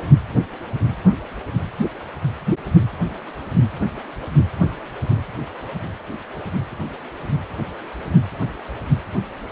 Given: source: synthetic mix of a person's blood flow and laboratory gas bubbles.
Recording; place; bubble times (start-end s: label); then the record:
Doppler ultrasound of blood flow; precordium
no bubbles
From the record:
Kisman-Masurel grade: 000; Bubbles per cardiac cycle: 0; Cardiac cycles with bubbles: 0%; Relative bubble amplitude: no bubbles discernible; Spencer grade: 0 (complete lack of bubble signals)